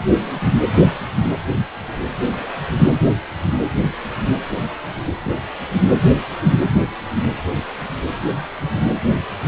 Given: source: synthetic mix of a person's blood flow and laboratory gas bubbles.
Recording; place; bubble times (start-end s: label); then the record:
Doppler ultrasound of blood flow; precordium
0.21-0.59 s: bubbles
2.34-2.44 s: bubbles
5.23-5.33 s: bubbles
From the record:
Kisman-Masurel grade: 121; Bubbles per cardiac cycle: 1 to 2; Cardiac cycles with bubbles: 10 to 50%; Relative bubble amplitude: barely perceptible (0.100 to 0.250); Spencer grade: 2 (many but less than half of the cardiac periods contain bubble signals, singularly or in groups); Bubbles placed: anywhere in the cardiac cycle